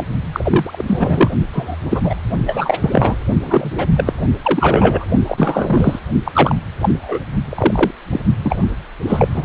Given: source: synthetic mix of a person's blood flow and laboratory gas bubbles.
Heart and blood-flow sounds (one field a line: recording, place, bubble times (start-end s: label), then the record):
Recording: Doppler ultrasound of blood flow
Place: precordium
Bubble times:
0.00-0.02 s: bubbles
0.33-1.31 s: bubbles
1.53-1.76 s: bubbles
1.89-2.00 s: bubbles
2.03-2.15 s: bubbles
2.46-2.76 s: bubbles
2.80-3.16 s: bubbles
3.44-3.72 s: bubbles
3.77-3.87 s: bubbles
3.96-4.13 s: bubbles
4.42-5.05 s: bubbles
5.26-5.99 s: bubbles
6.25-6.54 s: bubbles
6.80-7.19 s: bubbles
7.50-7.91 s: bubbles
8.12-8.21 s: bubbles
8.43-8.65 s: bubbles
9.08-9.28 s: bubbles
9.33-9.45 s: bubbles
From the record:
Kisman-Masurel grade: 243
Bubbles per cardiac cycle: several, 3 to 8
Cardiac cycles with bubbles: 100%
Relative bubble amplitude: loud (0.450 to 0.775)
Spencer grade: 3 (all of the cardiac periods contain showers or single bubble signals, but not dominating or overriding the cardiac motion signals)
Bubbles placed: only in the low amplitude regions of the cardiac cycle